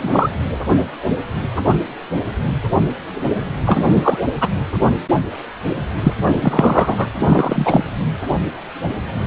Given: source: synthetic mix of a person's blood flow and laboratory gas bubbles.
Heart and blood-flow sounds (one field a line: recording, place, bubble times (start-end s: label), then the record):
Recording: Doppler ultrasound of blood flow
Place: precordium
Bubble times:
0.00-0.30 s: bubbles
3.65-4.18 s: bubbles
4.41-4.49 s: bubbles
6.03-6.13 s: bubbles
6.41-7.09 s: bubbles
7.21-7.84 s: bubbles
From the record:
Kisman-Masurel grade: 223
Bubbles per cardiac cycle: several, 3 to 8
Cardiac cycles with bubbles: 10 to 50%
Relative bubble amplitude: loud (0.450 to 0.775)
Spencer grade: 2 (many but less than half of the cardiac periods contain bubble signals, singularly or in groups)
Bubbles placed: anywhere in the cardiac cycle